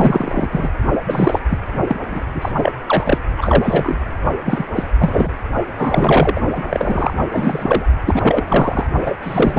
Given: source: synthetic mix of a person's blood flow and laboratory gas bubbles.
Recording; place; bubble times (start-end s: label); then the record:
Doppler ultrasound of blood flow; precordium
0.00-0.48 s: bubbles
0.52-0.69 s: bubbles
1.06-1.40 s: bubbles
1.50-1.59 s: bubbles
1.87-2.00 s: bubbles
2.10-2.22 s: bubbles
2.33-2.52 s: bubbles
2.57-2.73 s: bubbles
2.86-3.18 s: bubbles
3.37-3.98 s: bubbles
4.45-4.65 s: bubbles
4.75-4.83 s: bubbles
4.99-5.31 s: bubbles
5.77-6.40 s: bubbles
6.55-6.62 s: bubbles
6.70-7.13 s: bubbles
7.31-7.86 s: bubbles
8.06-8.42 s: bubbles
8.47-8.87 s: bubbles
9.04-9.15 s: bubbles
9.22-9.59 s: bubbles
From the record:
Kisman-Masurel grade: 343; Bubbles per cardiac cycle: rolling drumbeat, 9 or more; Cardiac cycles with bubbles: 100%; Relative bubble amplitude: loud (0.450 to 0.775); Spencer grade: 3 (all of the cardiac periods contain showers or single bubble signals, but not dominating or overriding the cardiac motion signals); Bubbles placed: only in the low amplitude regions of the cardiac cycle